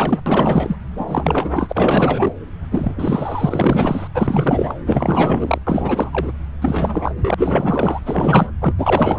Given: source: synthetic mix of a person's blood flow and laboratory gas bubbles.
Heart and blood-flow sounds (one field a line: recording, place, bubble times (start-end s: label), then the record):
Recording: Doppler ultrasound of blood flow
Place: subclavian vein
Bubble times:
0.00-0.21 s: bubbles
0.26-0.78 s: bubbles
0.97-2.33 s: bubbles
2.71-4.08 s: bubbles
4.14-4.74 s: bubbles
4.86-5.58 s: bubbles
5.67-6.32 s: bubbles
6.62-7.34 s: bubbles
7.37-8.01 s: bubbles
8.05-8.51 s: bubbles
8.61-8.72 s: bubbles
8.78-9.19 s: bubbles
From the record:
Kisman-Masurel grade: 444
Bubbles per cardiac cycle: continuous sound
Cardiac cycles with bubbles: 100%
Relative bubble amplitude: maximal (0.775 to 0.999)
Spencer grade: 4 (maximum detectable bubble signal sounding continuously throughout systole and diastole of every cardiac period, and overriding the amplitude of the normal cardiac signals)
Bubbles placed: anywhere in the cardiac cycle